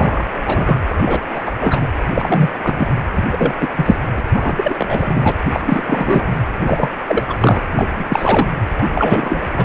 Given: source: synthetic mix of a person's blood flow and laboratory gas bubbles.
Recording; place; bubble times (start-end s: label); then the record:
Doppler ultrasound of blood flow; precordium
0.00-0.25 s: bubbles
0.43-0.76 s: bubbles
0.88-1.20 s: bubbles
1.34-1.50 s: bubbles
1.60-1.88 s: bubbles
2.14-2.51 s: bubbles
2.63-2.93 s: bubbles
3.14-3.23 s: bubbles
3.31-3.54 s: bubbles
3.60-3.69 s: bubbles
3.76-3.96 s: bubbles
4.16-4.22 s: bubbles
4.33-5.32 s: bubbles
5.53-5.62 s: bubbles
5.66-6.31 s: bubbles
6.65-6.91 s: bubbles
7.08-7.24 s: bubbles
7.29-7.37 s: bubbles
7.40-7.62 s: bubbles
7.71-8.05 s: bubbles
8.09-8.48 s: bubbles
8.78-8.88 s: bubbles
8.94-9.46 s: bubbles
9.53-9.64 s: bubbles
From the record:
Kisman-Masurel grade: 343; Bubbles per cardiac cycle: rolling drumbeat, 9 or more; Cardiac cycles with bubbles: 100%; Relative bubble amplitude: loud (0.450 to 0.775); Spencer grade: 3 (all of the cardiac periods contain showers or single bubble signals, but not dominating or overriding the cardiac motion signals); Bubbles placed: anywhere in the cardiac cycle